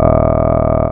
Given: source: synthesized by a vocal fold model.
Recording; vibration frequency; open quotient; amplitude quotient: sustained vowel; 40 Hz; 0.3; 1.3